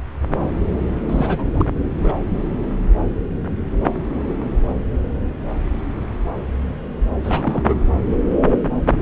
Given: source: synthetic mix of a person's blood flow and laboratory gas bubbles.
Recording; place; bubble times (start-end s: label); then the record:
Doppler ultrasound of blood flow; subclavian vein
1.06-1.70 s: bubbles
1.97-2.12 s: bubbles
7.23-7.64 s: bubbles
7.67-7.75 s: bubbles
From the record:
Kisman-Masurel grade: 222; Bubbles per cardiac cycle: several, 3 to 8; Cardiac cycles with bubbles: 10 to 50%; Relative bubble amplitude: moderate (0.250 to 0.450); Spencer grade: 2 (many but less than half of the cardiac periods contain bubble signals, singularly or in groups); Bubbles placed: anywhere in the cardiac cycle